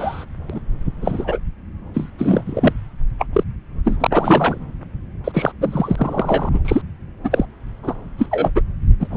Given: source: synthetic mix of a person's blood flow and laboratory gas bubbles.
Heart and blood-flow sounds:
Doppler ultrasound of blood flow; subclavian vein
0.00-0.24 s: bubbles
0.49-0.60 s: bubbles
1.01-1.38 s: bubbles
1.94-2.10 s: bubbles
2.18-2.73 s: bubbles
3.18-3.26 s: bubbles
3.32-3.44 s: bubbles
3.84-4.07 s: bubbles
4.12-4.58 s: bubbles
5.24-5.52 s: bubbles
5.60-6.49 s: bubbles
6.54-6.59 s: bubbles
6.64-6.81 s: bubbles
7.24-7.46 s: bubbles
7.83-7.94 s: bubbles
8.18-8.27 s: bubbles
8.31-8.51 s: bubbles
8.55-8.62 s: bubbles
9.00-9.08 s: bubbles
9.10-9.17 s: bubbles
From the record:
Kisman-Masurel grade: 243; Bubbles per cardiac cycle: several, 3 to 8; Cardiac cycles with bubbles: 100%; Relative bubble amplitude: loud (0.450 to 0.775); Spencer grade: 3 (all of the cardiac periods contain showers or single bubble signals, but not dominating or overriding the cardiac motion signals); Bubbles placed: anywhere in the cardiac cycle

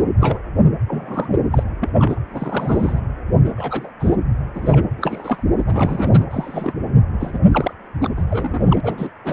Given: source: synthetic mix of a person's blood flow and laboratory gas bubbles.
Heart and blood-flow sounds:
Doppler ultrasound of blood flow; precordium
0.00-0.06 s: bubbles
0.20-0.39 s: bubbles
0.88-1.39 s: bubbles
1.51-1.63 s: bubbles
1.81-1.90 s: bubbles
1.98-2.19 s: bubbles
2.31-3.01 s: bubbles
3.44-3.91 s: bubbles
3.99-4.16 s: bubbles
4.54-4.85 s: bubbles
4.97-5.44 s: bubbles
5.51-5.63 s: bubbles
5.66-6.26 s: bubbles
6.30-6.73 s: bubbles
7.20-7.38 s: bubbles
7.51-7.73 s: bubbles
8.00-8.09 s: bubbles
8.17-8.24 s: bubbles
8.30-8.80 s: bubbles
8.83-9.10 s: bubbles
9.25-9.33 s: bubbles
From the record:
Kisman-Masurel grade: 242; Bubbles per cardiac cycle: several, 3 to 8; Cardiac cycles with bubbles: 100%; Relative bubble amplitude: moderate (0.250 to 0.450); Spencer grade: 3 (all of the cardiac periods contain showers or single bubble signals, but not dominating or overriding the cardiac motion signals); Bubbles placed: anywhere in the cardiac cycle

